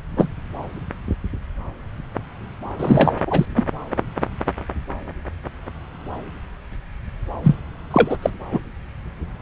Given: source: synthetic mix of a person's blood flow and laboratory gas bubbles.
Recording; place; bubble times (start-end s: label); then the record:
Doppler ultrasound of blood flow; subclavian vein
0.16-0.28 s: bubbles
2.79-3.17 s: bubbles
3.26-3.45 s: bubbles
3.55-3.66 s: bubbles
7.43-7.55 s: bubbles
7.91-8.17 s: bubbles
8.22-8.30 s: bubbles
8.52-8.59 s: bubbles
From the record:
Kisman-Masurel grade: 223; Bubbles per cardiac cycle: several, 3 to 8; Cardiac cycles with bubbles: 10 to 50%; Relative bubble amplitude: loud (0.450 to 0.775); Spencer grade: 2 (many but less than half of the cardiac periods contain bubble signals, singularly or in groups); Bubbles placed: anywhere in the cardiac cycle